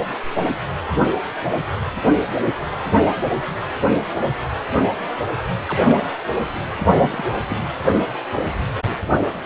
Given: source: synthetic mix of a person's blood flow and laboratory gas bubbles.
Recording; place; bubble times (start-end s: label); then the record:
Doppler ultrasound of blood flow; precordium
3.21-3.32 s: bubbles
5.67-6.07 s: bubbles
6.98-7.22 s: bubbles
7.48-7.58 s: bubbles
7.90-7.96 s: bubbles
8.35-8.43 s: bubbles
9.20-9.23 s: bubbles
From the record:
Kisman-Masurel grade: 121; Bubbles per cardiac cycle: 1 to 2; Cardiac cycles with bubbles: 10 to 50%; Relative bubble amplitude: barely perceptible (0.100 to 0.250); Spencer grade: 2 (many but less than half of the cardiac periods contain bubble signals, singularly or in groups); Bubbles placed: anywhere in the cardiac cycle